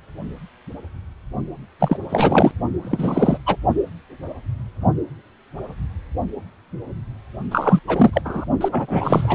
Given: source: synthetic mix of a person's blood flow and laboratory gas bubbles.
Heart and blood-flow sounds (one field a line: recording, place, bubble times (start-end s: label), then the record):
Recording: Doppler ultrasound of blood flow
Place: precordium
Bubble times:
1.79-1.97 s: bubbles
2.10-2.52 s: bubbles
2.82-3.38 s: bubbles
3.46-3.56 s: bubbles
7.51-7.80 s: bubbles
7.87-8.21 s: bubbles
8.24-8.44 s: bubbles
8.60-8.68 s: bubbles
8.71-9.35 s: bubbles
From the record:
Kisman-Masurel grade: 333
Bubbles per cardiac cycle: rolling drumbeat, 9 or more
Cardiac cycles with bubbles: 50 to 99%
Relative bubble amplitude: loud (0.450 to 0.775)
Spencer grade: 3 (all of the cardiac periods contain showers or single bubble signals, but not dominating or overriding the cardiac motion signals)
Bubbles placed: only in the low amplitude regions of the cardiac cycle